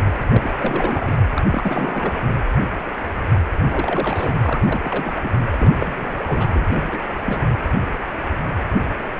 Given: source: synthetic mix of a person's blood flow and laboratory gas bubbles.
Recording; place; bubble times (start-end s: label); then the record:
Doppler ultrasound of blood flow; precordium
0.04-0.13 s: bubbles
0.28-0.55 s: bubbles
0.57-1.16 s: bubbles
1.34-1.42 s: bubbles
1.52-2.15 s: bubbles
3.64-4.38 s: bubbles
4.41-4.60 s: bubbles
4.62-5.29 s: bubbles
5.51-5.75 s: bubbles
5.80-6.21 s: bubbles
6.27-6.47 s: bubbles
6.52-6.65 s: bubbles
6.68-7.06 s: bubbles
7.25-7.40 s: bubbles
From the record:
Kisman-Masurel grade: 332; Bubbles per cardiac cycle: rolling drumbeat, 9 or more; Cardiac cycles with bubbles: 50 to 99%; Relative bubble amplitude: moderate (0.250 to 0.450); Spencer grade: 3 (all of the cardiac periods contain showers or single bubble signals, but not dominating or overriding the cardiac motion signals); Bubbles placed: anywhere in the cardiac cycle